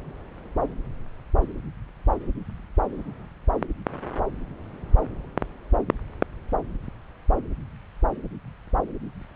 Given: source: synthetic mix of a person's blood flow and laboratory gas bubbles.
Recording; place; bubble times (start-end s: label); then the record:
Doppler ultrasound of blood flow; subclavian vein
no bubbles
From the record:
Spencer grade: 0 (complete lack of bubble signals)